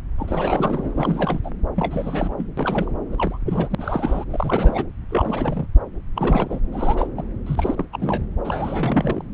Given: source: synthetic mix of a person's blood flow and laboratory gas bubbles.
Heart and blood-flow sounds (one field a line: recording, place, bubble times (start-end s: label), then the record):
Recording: Doppler ultrasound of blood flow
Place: subclavian vein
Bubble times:
0.18-1.40 s: bubbles
1.43-1.50 s: bubbles
1.76-2.34 s: bubbles
2.37-2.46 s: bubbles
2.57-2.90 s: bubbles
3.11-3.38 s: bubbles
3.45-3.75 s: bubbles
3.77-4.25 s: bubbles
4.30-4.86 s: bubbles
5.08-5.67 s: bubbles
6.16-6.60 s: bubbles
6.72-7.07 s: bubbles
7.17-7.23 s: bubbles
7.46-7.85 s: bubbles
7.93-8.24 s: bubbles
8.44-9.25 s: bubbles
From the record:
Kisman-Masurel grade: 342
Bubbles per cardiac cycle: rolling drumbeat, 9 or more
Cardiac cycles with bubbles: 100%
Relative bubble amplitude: moderate (0.250 to 0.450)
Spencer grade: 3 (all of the cardiac periods contain showers or single bubble signals, but not dominating or overriding the cardiac motion signals)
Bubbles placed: anywhere in the cardiac cycle